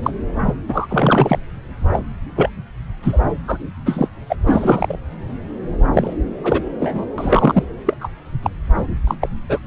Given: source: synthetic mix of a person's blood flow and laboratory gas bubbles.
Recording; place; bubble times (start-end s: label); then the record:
Doppler ultrasound of blood flow; subclavian vein
0.00-0.10 s: bubbles
0.45-0.55 s: bubbles
0.68-0.87 s: bubbles
0.90-1.39 s: bubbles
1.92-2.00 s: bubbles
2.35-2.50 s: bubbles
3.02-3.21 s: bubbles
3.48-3.58 s: bubbles
3.85-4.08 s: bubbles
4.29-4.37 s: bubbles
4.46-4.96 s: bubbles
5.93-6.13 s: bubbles
6.44-6.62 s: bubbles
6.79-7.05 s: bubbles
7.18-7.63 s: bubbles
7.86-7.95 s: bubbles
8.01-8.09 s: bubbles
8.43-8.50 s: bubbles
9.07-9.15 s: bubbles
9.21-9.29 s: bubbles
9.49-9.59 s: bubbles
From the record:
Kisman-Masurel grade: 243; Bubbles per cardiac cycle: several, 3 to 8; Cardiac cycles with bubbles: 100%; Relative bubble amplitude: loud (0.450 to 0.775); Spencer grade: 3 (all of the cardiac periods contain showers or single bubble signals, but not dominating or overriding the cardiac motion signals); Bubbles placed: anywhere in the cardiac cycle